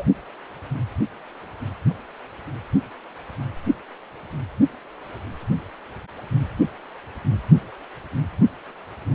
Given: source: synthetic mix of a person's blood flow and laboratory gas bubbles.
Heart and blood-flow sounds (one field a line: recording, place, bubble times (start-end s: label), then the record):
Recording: Doppler ultrasound of blood flow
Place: precordium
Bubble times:
0.00-0.03 s: bubbles
From the record:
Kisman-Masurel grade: 113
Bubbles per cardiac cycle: 1 to 2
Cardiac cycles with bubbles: 1 to 10%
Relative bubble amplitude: loud (0.450 to 0.775)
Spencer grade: 1 (occasional bubble signal discernible with the cardiac motion signal, with majority of cardiac periods free of bubbles)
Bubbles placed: only in the low amplitude regions of the cardiac cycle